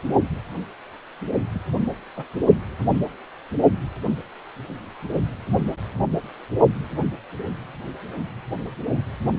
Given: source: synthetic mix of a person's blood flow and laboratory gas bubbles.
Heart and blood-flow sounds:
Doppler ultrasound of blood flow; precordium
1.54-1.59 s: bubbles
2.16-2.24 s: bubbles
From the record:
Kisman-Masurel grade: 111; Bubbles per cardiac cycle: 1 to 2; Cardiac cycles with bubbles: 1 to 10%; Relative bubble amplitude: barely perceptible (0.100 to 0.250); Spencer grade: 1 (occasional bubble signal discernible with the cardiac motion signal, with majority of cardiac periods free of bubbles); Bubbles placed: only in the low amplitude regions of the cardiac cycle

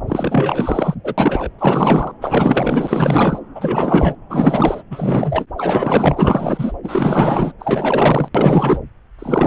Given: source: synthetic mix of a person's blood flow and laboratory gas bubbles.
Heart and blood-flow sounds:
Doppler ultrasound of blood flow; subclavian vein
0.08-0.94 s: bubbles
1.04-1.14 s: bubbles
1.17-1.48 s: bubbles
1.58-2.12 s: bubbles
2.21-3.39 s: bubbles
3.54-4.15 s: bubbles
4.29-4.83 s: bubbles
4.90-5.46 s: bubbles
5.58-6.72 s: bubbles
6.83-7.52 s: bubbles
7.59-8.29 s: bubbles
8.35-8.81 s: bubbles
9.19-9.47 s: bubbles
From the record:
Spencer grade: 4 (maximum detectable bubble signal sounding continuously throughout systole and diastole of every cardiac period, and overriding the amplitude of the normal cardiac signals); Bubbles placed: anywhere in the cardiac cycle

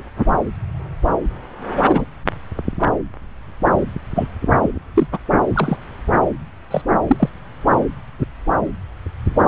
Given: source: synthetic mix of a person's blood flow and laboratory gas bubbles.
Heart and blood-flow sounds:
Doppler ultrasound of blood flow; subclavian vein
1.88-2.06 s: bubbles
4.16-4.27 s: bubbles
4.62-4.69 s: bubbles
4.95-5.07 s: bubbles
5.12-5.18 s: bubbles
5.54-5.77 s: bubbles
6.71-6.82 s: bubbles
7.08-7.29 s: bubbles
From the record:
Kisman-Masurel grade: 123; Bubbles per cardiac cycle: 1 to 2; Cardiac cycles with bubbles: 10 to 50%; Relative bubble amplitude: loud (0.450 to 0.775); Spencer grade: 2 (many but less than half of the cardiac periods contain bubble signals, singularly or in groups); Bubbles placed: anywhere in the cardiac cycle

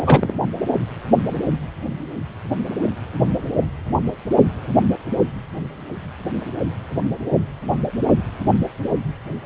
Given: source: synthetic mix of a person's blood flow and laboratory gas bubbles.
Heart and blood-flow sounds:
Doppler ultrasound of blood flow; precordium
0.06-0.34 s: bubbles
From the record:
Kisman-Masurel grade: 113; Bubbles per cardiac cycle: 1 to 2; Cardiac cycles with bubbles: 1 to 10%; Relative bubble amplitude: loud (0.450 to 0.775); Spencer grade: 1 (occasional bubble signal discernible with the cardiac motion signal, with majority of cardiac periods free of bubbles); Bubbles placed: anywhere in the cardiac cycle

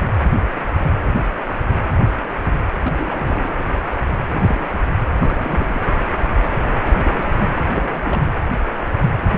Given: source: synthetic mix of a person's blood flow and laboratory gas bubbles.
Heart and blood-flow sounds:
Doppler ultrasound of blood flow; precordium
2.79-3.64 s: bubbles
4.29-4.85 s: bubbles
5.21-5.90 s: bubbles
6.98-7.32 s: bubbles
7.40-7.50 s: bubbles
7.73-8.21 s: bubbles
8.25-8.31 s: bubbles
From the record:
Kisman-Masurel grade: 221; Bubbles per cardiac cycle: several, 3 to 8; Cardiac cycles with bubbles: 10 to 50%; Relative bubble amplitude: barely perceptible (0.100 to 0.250); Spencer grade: 2 (many but less than half of the cardiac periods contain bubble signals, singularly or in groups); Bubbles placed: anywhere in the cardiac cycle

